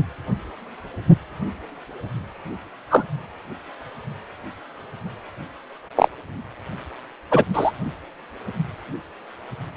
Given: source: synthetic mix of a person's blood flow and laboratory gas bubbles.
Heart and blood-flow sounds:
Doppler ultrasound of blood flow; precordium
2.90-3.04 s: bubbles
5.96-6.08 s: bubbles
7.30-7.44 s: bubbles
7.53-7.71 s: bubbles
From the record:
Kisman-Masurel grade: 123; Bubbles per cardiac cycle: 1 to 2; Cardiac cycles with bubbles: 10 to 50%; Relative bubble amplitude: loud (0.450 to 0.775); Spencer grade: 2 (many but less than half of the cardiac periods contain bubble signals, singularly or in groups); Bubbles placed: anywhere in the cardiac cycle

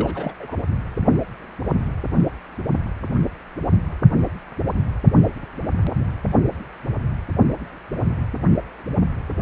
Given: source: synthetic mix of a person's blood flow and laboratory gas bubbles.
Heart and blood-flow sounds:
Doppler ultrasound of blood flow; precordium
0.00-0.34 s: bubbles
0.39-0.57 s: bubbles
From the record:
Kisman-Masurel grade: 211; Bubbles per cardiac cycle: several, 3 to 8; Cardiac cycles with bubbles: 1 to 10%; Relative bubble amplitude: barely perceptible (0.100 to 0.250); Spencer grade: 1 (occasional bubble signal discernible with the cardiac motion signal, with majority of cardiac periods free of bubbles); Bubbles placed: only in the low amplitude regions of the cardiac cycle

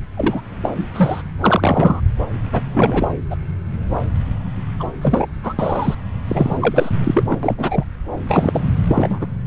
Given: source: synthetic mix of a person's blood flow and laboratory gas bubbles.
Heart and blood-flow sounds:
Doppler ultrasound of blood flow; subclavian vein
0.16-0.41 s: bubbles
0.62-0.69 s: bubbles
0.78-0.86 s: bubbles
0.94-1.23 s: bubbles
1.41-2.01 s: bubbles
2.52-2.61 s: bubbles
2.73-3.08 s: bubbles
3.30-3.36 s: bubbles
4.79-4.89 s: bubbles
5.01-5.26 s: bubbles
5.43-5.53 s: bubbles
5.58-5.95 s: bubbles
6.26-6.58 s: bubbles
6.60-6.91 s: bubbles
7.04-7.24 s: bubbles
7.29-7.38 s: bubbles
7.43-7.84 s: bubbles
8.28-8.62 s: bubbles
8.87-9.27 s: bubbles
9.45-9.47 s: bubbles
From the record:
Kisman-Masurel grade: 233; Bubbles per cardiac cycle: several, 3 to 8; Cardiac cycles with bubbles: 50 to 99%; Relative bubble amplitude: loud (0.450 to 0.775); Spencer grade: 3 (all of the cardiac periods contain showers or single bubble signals, but not dominating or overriding the cardiac motion signals); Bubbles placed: anywhere in the cardiac cycle

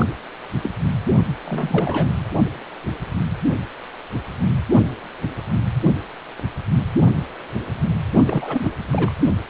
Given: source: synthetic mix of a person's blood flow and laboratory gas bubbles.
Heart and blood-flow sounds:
Doppler ultrasound of blood flow; precordium
0.00-0.06 s: bubbles
0.62-0.71 s: bubbles
1.45-2.23 s: bubbles
8.26-8.70 s: bubbles
8.91-9.15 s: bubbles
From the record:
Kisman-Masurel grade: 222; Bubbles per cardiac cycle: several, 3 to 8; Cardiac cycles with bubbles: 10 to 50%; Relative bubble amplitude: moderate (0.250 to 0.450); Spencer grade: 2 (many but less than half of the cardiac periods contain bubble signals, singularly or in groups); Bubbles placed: only in the low amplitude regions of the cardiac cycle

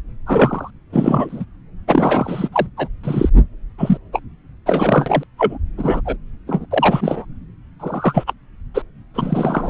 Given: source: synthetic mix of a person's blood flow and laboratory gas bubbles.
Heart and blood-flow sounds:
Doppler ultrasound of blood flow; subclavian vein
0.26-0.70 s: bubbles
0.93-1.45 s: bubbles
1.88-2.49 s: bubbles
2.52-2.67 s: bubbles
2.77-2.88 s: bubbles
3.03-3.29 s: bubbles
3.36-3.42 s: bubbles
3.78-3.98 s: bubbles
4.12-4.21 s: bubbles
4.66-5.23 s: bubbles
5.38-5.58 s: bubbles
5.77-6.01 s: bubbles
6.05-6.17 s: bubbles
6.47-6.66 s: bubbles
6.71-7.25 s: bubbles
7.79-8.24 s: bubbles
8.27-8.33 s: bubbles
8.74-8.83 s: bubbles
9.14-9.70 s: bubbles
From the record:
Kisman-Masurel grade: 243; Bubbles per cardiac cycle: several, 3 to 8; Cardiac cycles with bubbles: 100%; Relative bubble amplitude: loud (0.450 to 0.775); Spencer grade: 3 (all of the cardiac periods contain showers or single bubble signals, but not dominating or overriding the cardiac motion signals); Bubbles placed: anywhere in the cardiac cycle

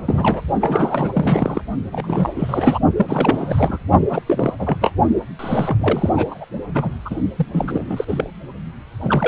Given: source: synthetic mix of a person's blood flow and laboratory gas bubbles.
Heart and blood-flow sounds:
Doppler ultrasound of blood flow; precordium
0.05-0.42 s: bubbles
0.60-1.61 s: bubbles
1.92-2.79 s: bubbles
2.96-3.79 s: bubbles
4.09-4.21 s: bubbles
4.26-4.53 s: bubbles
4.58-4.77 s: bubbles
4.81-4.93 s: bubbles
5.39-6.09 s: bubbles
6.15-6.45 s: bubbles
6.74-6.92 s: bubbles
7.05-7.15 s: bubbles
7.35-7.46 s: bubbles
7.53-8.04 s: bubbles
8.07-8.28 s: bubbles
9.00-9.28 s: bubbles
From the record:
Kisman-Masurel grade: 342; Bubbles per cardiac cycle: rolling drumbeat, 9 or more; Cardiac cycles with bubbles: 100%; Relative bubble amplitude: moderate (0.250 to 0.450); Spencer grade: 3 (all of the cardiac periods contain showers or single bubble signals, but not dominating or overriding the cardiac motion signals); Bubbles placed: only in the low amplitude regions of the cardiac cycle

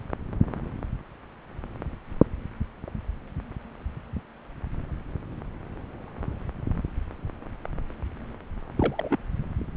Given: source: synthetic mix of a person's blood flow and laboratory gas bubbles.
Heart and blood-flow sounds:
Doppler ultrasound of blood flow; subclavian vein
8.77-9.18 s: bubbles
From the record:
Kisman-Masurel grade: 212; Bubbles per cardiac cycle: several, 3 to 8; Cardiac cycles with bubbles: 1 to 10%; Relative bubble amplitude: moderate (0.250 to 0.450); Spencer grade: 1 (occasional bubble signal discernible with the cardiac motion signal, with majority of cardiac periods free of bubbles); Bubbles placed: anywhere in the cardiac cycle

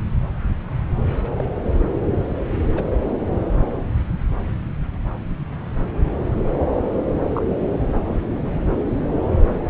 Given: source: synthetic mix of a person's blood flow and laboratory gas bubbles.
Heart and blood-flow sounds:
Doppler ultrasound of blood flow; subclavian vein
1.36-1.44 s: bubbles
2.75-2.83 s: bubbles
7.34-7.42 s: bubbles
8.04-8.51 s: bubbles
9.03-9.21 s: bubbles
From the record:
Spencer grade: 2 (many but less than half of the cardiac periods contain bubble signals, singularly or in groups); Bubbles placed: anywhere in the cardiac cycle

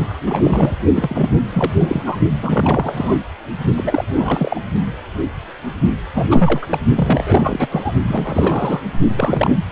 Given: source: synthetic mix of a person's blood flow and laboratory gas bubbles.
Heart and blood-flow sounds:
Doppler ultrasound of blood flow; precordium
0.00-0.18 s: bubbles
0.22-0.76 s: bubbles
0.94-1.29 s: bubbles
1.50-2.02 s: bubbles
2.05-2.17 s: bubbles
2.40-3.17 s: bubbles
3.77-4.05 s: bubbles
4.15-4.60 s: bubbles
6.14-6.67 s: bubbles
6.70-6.80 s: bubbles
6.95-7.92 s: bubbles
8.07-8.80 s: bubbles
9.16-9.63 s: bubbles
From the record:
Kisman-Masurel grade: 332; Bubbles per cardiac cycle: rolling drumbeat, 9 or more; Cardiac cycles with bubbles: 50 to 99%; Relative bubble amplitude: moderate (0.250 to 0.450); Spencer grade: 3 (all of the cardiac periods contain showers or single bubble signals, but not dominating or overriding the cardiac motion signals); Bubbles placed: only in the low amplitude regions of the cardiac cycle

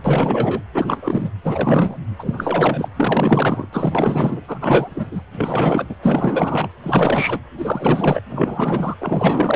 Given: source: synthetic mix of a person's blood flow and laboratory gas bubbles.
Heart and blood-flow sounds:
Doppler ultrasound of blood flow; precordium
0.04-0.62 s: bubbles
0.74-1.31 s: bubbles
1.44-1.97 s: bubbles
2.19-2.88 s: bubbles
2.96-3.67 s: bubbles
3.73-4.41 s: bubbles
4.47-5.21 s: bubbles
5.33-5.86 s: bubbles
5.89-5.96 s: bubbles
6.00-6.69 s: bubbles
6.83-7.39 s: bubbles
7.58-8.21 s: bubbles
8.29-8.96 s: bubbles
9.00-9.56 s: bubbles
From the record:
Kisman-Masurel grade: 444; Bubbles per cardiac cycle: continuous sound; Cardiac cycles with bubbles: 100%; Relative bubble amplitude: maximal (0.775 to 0.999); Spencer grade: 4 (maximum detectable bubble signal sounding continuously throughout systole and diastole of every cardiac period, and overriding the amplitude of the normal cardiac signals); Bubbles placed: anywhere in the cardiac cycle

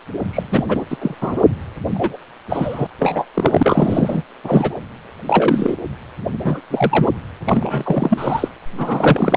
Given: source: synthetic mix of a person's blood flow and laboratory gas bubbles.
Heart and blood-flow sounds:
Doppler ultrasound of blood flow; precordium
0.29-0.84 s: bubbles
0.90-0.96 s: bubbles
1.01-1.15 s: bubbles
1.21-1.47 s: bubbles
1.95-2.17 s: bubbles
2.49-2.87 s: bubbles
2.99-3.25 s: bubbles
3.34-4.23 s: bubbles
4.44-4.77 s: bubbles
5.25-5.76 s: bubbles
6.44-6.61 s: bubbles
6.70-7.11 s: bubbles
7.46-8.48 s: bubbles
8.78-9.37 s: bubbles
From the record:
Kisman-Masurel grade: 243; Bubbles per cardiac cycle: several, 3 to 8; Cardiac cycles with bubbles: 100%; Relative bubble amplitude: loud (0.450 to 0.775); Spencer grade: 3 (all of the cardiac periods contain showers or single bubble signals, but not dominating or overriding the cardiac motion signals); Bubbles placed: anywhere in the cardiac cycle

